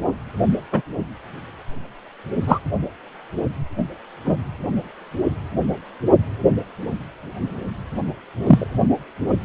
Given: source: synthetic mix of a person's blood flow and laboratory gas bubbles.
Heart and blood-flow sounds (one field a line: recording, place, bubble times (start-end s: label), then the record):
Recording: Doppler ultrasound of blood flow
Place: precordium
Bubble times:
0.72-0.81 s: bubbles
2.46-2.59 s: bubbles
4.25-4.37 s: bubbles
8.46-8.67 s: bubbles
From the record:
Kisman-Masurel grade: 123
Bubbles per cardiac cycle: 1 to 2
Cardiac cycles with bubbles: 10 to 50%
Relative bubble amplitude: loud (0.450 to 0.775)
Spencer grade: 2 (many but less than half of the cardiac periods contain bubble signals, singularly or in groups)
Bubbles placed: anywhere in the cardiac cycle